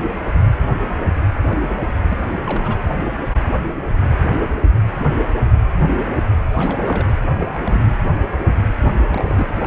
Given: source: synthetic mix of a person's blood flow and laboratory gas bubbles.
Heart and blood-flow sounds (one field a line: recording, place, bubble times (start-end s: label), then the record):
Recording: Doppler ultrasound of blood flow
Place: precordium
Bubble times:
1.46-1.96 s: bubbles
2.10-2.76 s: bubbles
6.51-7.08 s: bubbles
7.37-7.58 s: bubbles
7.62-7.80 s: bubbles
8.79-8.92 s: bubbles
9.07-9.49 s: bubbles
9.53-9.67 s: bubbles
From the record:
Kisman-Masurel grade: 221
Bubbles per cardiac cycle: several, 3 to 8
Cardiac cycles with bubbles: 10 to 50%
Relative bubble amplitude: barely perceptible (0.100 to 0.250)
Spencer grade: 2 (many but less than half of the cardiac periods contain bubble signals, singularly or in groups)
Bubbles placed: anywhere in the cardiac cycle